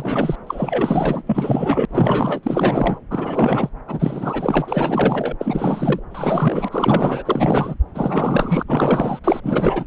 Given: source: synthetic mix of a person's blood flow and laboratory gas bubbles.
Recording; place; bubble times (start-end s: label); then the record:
Doppler ultrasound of blood flow; subclavian vein
0.00-0.35 s: bubbles
0.46-1.22 s: bubbles
1.27-1.85 s: bubbles
1.89-3.00 s: bubbles
3.10-3.69 s: bubbles
3.87-5.36 s: bubbles
5.40-6.00 s: bubbles
6.09-6.68 s: bubbles
6.71-7.75 s: bubbles
7.93-8.63 s: bubbles
8.67-9.19 s: bubbles
9.24-9.41 s: bubbles
9.43-9.85 s: bubbles
From the record:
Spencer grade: 4 (maximum detectable bubble signal sounding continuously throughout systole and diastole of every cardiac period, and overriding the amplitude of the normal cardiac signals); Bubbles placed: anywhere in the cardiac cycle